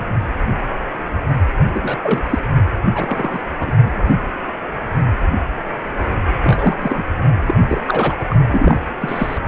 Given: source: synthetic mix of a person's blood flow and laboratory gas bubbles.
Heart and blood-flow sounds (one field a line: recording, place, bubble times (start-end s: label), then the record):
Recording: Doppler ultrasound of blood flow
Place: precordium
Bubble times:
1.74-1.99 s: bubbles
2.03-2.22 s: bubbles
2.30-2.38 s: bubbles
2.91-3.42 s: bubbles
3.60-3.72 s: bubbles
3.83-4.03 s: bubbles
6.43-6.75 s: bubbles
6.79-7.04 s: bubbles
7.48-7.55 s: bubbles
7.67-7.82 s: bubbles
7.87-8.16 s: bubbles
8.29-8.38 s: bubbles
8.51-8.77 s: bubbles
9.00-9.38 s: bubbles
From the record:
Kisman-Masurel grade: 232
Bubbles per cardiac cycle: several, 3 to 8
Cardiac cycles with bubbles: 50 to 99%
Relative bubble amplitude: moderate (0.250 to 0.450)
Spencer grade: 3 (all of the cardiac periods contain showers or single bubble signals, but not dominating or overriding the cardiac motion signals)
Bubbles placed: anywhere in the cardiac cycle